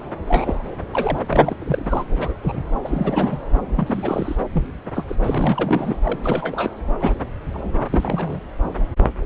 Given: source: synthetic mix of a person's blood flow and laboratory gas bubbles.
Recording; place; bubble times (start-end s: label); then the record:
Doppler ultrasound of blood flow; subclavian vein
0.28-0.76 s: bubbles
0.92-1.19 s: bubbles
1.30-1.56 s: bubbles
1.59-2.03 s: bubbles
2.15-2.33 s: bubbles
2.42-2.63 s: bubbles
2.84-3.38 s: bubbles
3.76-4.35 s: bubbles
4.52-4.67 s: bubbles
4.94-5.05 s: bubbles
5.08-5.16 s: bubbles
5.24-5.96 s: bubbles
6.05-6.80 s: bubbles
7.00-7.25 s: bubbles
7.53-7.89 s: bubbles
7.91-8.39 s: bubbles
From the record:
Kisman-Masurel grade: 242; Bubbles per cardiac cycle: several, 3 to 8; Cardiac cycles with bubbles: 100%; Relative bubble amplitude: moderate (0.250 to 0.450); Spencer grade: 3 (all of the cardiac periods contain showers or single bubble signals, but not dominating or overriding the cardiac motion signals); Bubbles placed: anywhere in the cardiac cycle